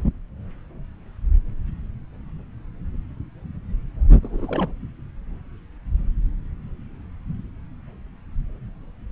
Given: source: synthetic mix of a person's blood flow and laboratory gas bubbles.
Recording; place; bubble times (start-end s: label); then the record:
Doppler ultrasound of blood flow; subclavian vein
4.22-4.71 s: bubbles
From the record:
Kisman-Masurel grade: 211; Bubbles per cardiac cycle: several, 3 to 8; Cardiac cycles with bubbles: 1 to 10%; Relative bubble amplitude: barely perceptible (0.100 to 0.250); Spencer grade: 1 (occasional bubble signal discernible with the cardiac motion signal, with majority of cardiac periods free of bubbles); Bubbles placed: anywhere in the cardiac cycle